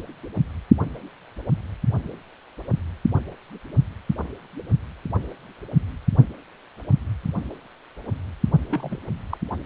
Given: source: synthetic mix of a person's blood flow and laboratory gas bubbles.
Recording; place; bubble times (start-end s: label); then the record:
Doppler ultrasound of blood flow; precordium
8.69-9.00 s: bubbles
9.29-9.38 s: bubbles
From the record:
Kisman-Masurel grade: 111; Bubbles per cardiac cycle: 1 to 2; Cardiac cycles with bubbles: 1 to 10%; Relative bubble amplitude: barely perceptible (0.100 to 0.250); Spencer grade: 1 (occasional bubble signal discernible with the cardiac motion signal, with majority of cardiac periods free of bubbles); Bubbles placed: only in the low amplitude regions of the cardiac cycle